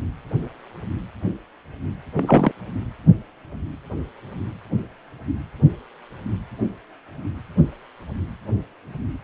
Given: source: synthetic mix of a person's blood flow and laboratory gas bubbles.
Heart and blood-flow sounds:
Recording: Doppler ultrasound of blood flow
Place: precordium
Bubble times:
2.15-2.51 s: bubbles
From the record:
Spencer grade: 1 (occasional bubble signal discernible with the cardiac motion signal, with majority of cardiac periods free of bubbles)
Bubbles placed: anywhere in the cardiac cycle

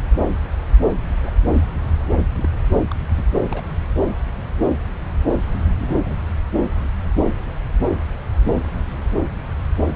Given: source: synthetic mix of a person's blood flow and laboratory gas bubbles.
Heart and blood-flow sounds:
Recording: Doppler ultrasound of blood flow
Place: subclavian vein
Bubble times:
0.30-0.35 s: bubbles
1.23-1.31 s: bubbles
2.11-2.19 s: bubbles
2.37-2.59 s: bubbles
2.91-2.95 s: bubbles
3.17-3.23 s: bubbles
3.49-3.77 s: bubbles
5.82-6.17 s: bubbles
From the record:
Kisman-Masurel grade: 121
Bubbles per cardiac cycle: 1 to 2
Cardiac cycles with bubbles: 10 to 50%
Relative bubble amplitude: barely perceptible (0.100 to 0.250)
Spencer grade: 2 (many but less than half of the cardiac periods contain bubble signals, singularly or in groups)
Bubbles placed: anywhere in the cardiac cycle

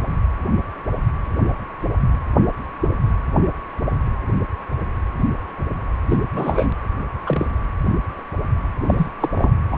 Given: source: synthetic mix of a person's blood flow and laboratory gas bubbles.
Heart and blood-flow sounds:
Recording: Doppler ultrasound of blood flow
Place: precordium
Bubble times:
6.09-6.18 s: bubbles
6.33-6.75 s: bubbles
7.25-7.46 s: bubbles
8.86-8.94 s: bubbles
8.97-9.12 s: bubbles
9.20-9.30 s: bubbles
9.35-9.52 s: bubbles
9.70-9.77 s: bubbles
From the record:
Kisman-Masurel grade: 222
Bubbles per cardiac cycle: several, 3 to 8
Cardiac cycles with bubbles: 10 to 50%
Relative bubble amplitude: moderate (0.250 to 0.450)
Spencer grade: 2 (many but less than half of the cardiac periods contain bubble signals, singularly or in groups)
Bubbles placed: anywhere in the cardiac cycle

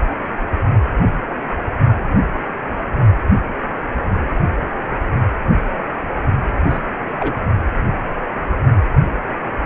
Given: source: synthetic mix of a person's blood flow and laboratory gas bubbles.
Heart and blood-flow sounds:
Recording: Doppler ultrasound of blood flow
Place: precordium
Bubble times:
6.69-6.79 s: bubbles
7.18-7.34 s: bubbles
From the record:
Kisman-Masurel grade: 112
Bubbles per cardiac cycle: 1 to 2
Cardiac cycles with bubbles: 1 to 10%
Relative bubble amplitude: moderate (0.250 to 0.450)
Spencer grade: 1 (occasional bubble signal discernible with the cardiac motion signal, with majority of cardiac periods free of bubbles)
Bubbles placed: only in the low amplitude regions of the cardiac cycle

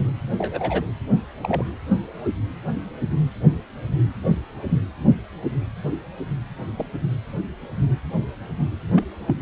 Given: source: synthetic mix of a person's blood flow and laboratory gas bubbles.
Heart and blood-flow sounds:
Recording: Doppler ultrasound of blood flow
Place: precordium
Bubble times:
0.38-0.83 s: bubbles
1.43-1.64 s: bubbles
4.25-4.37 s: bubbles
4.68-4.79 s: bubbles
6.77-6.86 s: bubbles
8.96-9.04 s: bubbles
9.28-9.38 s: bubbles
From the record:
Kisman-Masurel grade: 121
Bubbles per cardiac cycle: 1 to 2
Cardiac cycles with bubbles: 10 to 50%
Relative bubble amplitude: barely perceptible (0.100 to 0.250)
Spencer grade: 2 (many but less than half of the cardiac periods contain bubble signals, singularly or in groups)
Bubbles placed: anywhere in the cardiac cycle

